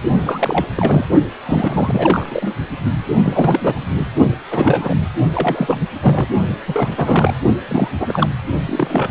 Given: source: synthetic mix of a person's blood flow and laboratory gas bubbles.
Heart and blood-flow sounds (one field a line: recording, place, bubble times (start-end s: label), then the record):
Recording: Doppler ultrasound of blood flow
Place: precordium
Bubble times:
0.22-0.66 s: bubbles
0.74-1.05 s: bubbles
1.45-2.54 s: bubbles
3.25-3.79 s: bubbles
3.97-4.06 s: bubbles
4.50-4.96 s: bubbles
5.32-5.82 s: bubbles
6.00-6.27 s: bubbles
6.67-7.34 s: bubbles
7.68-7.89 s: bubbles
8.00-8.29 s: bubbles
8.65-9.11 s: bubbles
From the record:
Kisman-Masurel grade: 332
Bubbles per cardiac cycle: rolling drumbeat, 9 or more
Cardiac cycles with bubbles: 50 to 99%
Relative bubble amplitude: moderate (0.250 to 0.450)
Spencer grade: 3 (all of the cardiac periods contain showers or single bubble signals, but not dominating or overriding the cardiac motion signals)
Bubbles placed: only in the low amplitude regions of the cardiac cycle